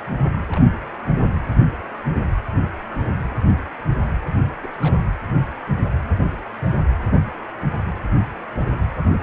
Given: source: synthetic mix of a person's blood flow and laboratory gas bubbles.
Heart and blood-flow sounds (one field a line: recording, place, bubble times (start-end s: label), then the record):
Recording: Doppler ultrasound of blood flow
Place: precordium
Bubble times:
0.49-0.65 s: bubbles
3.30-3.34 s: bubbles
3.87-3.96 s: bubbles
4.62-4.70 s: bubbles
4.80-4.99 s: bubbles
9.13-9.19 s: bubbles
From the record:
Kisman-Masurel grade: 121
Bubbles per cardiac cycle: 1 to 2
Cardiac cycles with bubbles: 10 to 50%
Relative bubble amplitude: barely perceptible (0.100 to 0.250)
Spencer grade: 2 (many but less than half of the cardiac periods contain bubble signals, singularly or in groups)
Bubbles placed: anywhere in the cardiac cycle